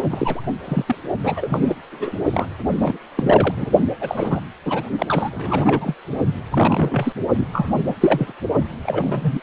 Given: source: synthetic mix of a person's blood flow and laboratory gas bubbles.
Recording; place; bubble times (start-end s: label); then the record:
Doppler ultrasound of blood flow; precordium
0.10-0.41 s: bubbles
0.64-0.95 s: bubbles
1.23-1.76 s: bubbles
1.92-2.16 s: bubbles
2.33-2.47 s: bubbles
2.77-2.98 s: bubbles
3.16-3.70 s: bubbles
4.00-4.40 s: bubbles
4.66-4.84 s: bubbles
4.98-5.29 s: bubbles
5.32-5.94 s: bubbles
6.52-7.12 s: bubbles
7.37-7.46 s: bubbles
7.53-7.73 s: bubbles
7.78-7.93 s: bubbles
8.00-8.33 s: bubbles
8.83-9.43 s: bubbles
From the record:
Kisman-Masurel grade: 342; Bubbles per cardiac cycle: rolling drumbeat, 9 or more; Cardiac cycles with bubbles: 100%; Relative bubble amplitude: moderate (0.250 to 0.450); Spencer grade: 3 (all of the cardiac periods contain showers or single bubble signals, but not dominating or overriding the cardiac motion signals); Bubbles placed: only in the low amplitude regions of the cardiac cycle